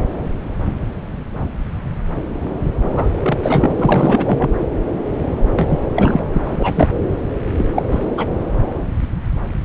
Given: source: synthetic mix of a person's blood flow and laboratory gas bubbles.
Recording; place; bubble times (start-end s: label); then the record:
Doppler ultrasound of blood flow; subclavian vein
2.81-3.72 s: bubbles
3.76-4.49 s: bubbles
5.54-5.79 s: bubbles
5.96-6.21 s: bubbles
6.34-6.41 s: bubbles
6.44-6.88 s: bubbles
7.58-7.64 s: bubbles
7.75-7.83 s: bubbles
7.91-8.06 s: bubbles
8.17-8.27 s: bubbles
From the record:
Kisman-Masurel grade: 223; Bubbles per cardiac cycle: several, 3 to 8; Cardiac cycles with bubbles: 10 to 50%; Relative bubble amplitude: loud (0.450 to 0.775); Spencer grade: 2 (many but less than half of the cardiac periods contain bubble signals, singularly or in groups); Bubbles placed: anywhere in the cardiac cycle